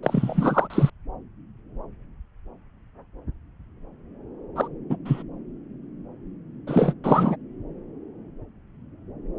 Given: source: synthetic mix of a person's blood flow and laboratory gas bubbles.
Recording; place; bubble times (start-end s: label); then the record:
Doppler ultrasound of blood flow; subclavian vein
0.03-0.90 s: bubbles
4.55-4.68 s: bubbles
4.89-4.97 s: bubbles
5.05-5.23 s: bubbles
6.67-6.93 s: bubbles
7.04-7.36 s: bubbles
From the record:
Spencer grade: 2 (many but less than half of the cardiac periods contain bubble signals, singularly or in groups); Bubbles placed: anywhere in the cardiac cycle